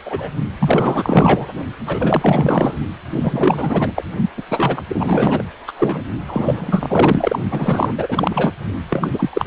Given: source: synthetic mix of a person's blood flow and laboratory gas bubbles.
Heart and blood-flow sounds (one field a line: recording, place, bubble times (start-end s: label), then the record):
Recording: Doppler ultrasound of blood flow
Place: precordium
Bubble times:
0.06-0.30 s: bubbles
0.59-1.47 s: bubbles
1.86-2.77 s: bubbles
3.13-3.91 s: bubbles
3.95-4.04 s: bubbles
4.37-4.42 s: bubbles
4.49-4.83 s: bubbles
4.88-5.45 s: bubbles
5.67-5.72 s: bubbles
5.78-6.03 s: bubbles
6.28-7.40 s: bubbles
7.50-7.95 s: bubbles
7.98-8.52 s: bubbles
8.89-9.29 s: bubbles
9.33-9.47 s: bubbles
From the record:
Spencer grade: 4 (maximum detectable bubble signal sounding continuously throughout systole and diastole of every cardiac period, and overriding the amplitude of the normal cardiac signals)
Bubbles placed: only in the low amplitude regions of the cardiac cycle